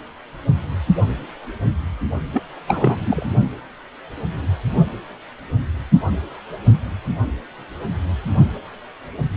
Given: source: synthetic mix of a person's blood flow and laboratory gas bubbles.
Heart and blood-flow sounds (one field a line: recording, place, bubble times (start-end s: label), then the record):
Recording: Doppler ultrasound of blood flow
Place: precordium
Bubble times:
2.33-2.42 s: bubbles
2.67-2.97 s: bubbles
3.04-3.26 s: bubbles
From the record:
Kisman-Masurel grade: 222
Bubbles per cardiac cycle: several, 3 to 8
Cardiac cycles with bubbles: 10 to 50%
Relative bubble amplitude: moderate (0.250 to 0.450)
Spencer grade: 2 (many but less than half of the cardiac periods contain bubble signals, singularly or in groups)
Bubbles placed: only in the low amplitude regions of the cardiac cycle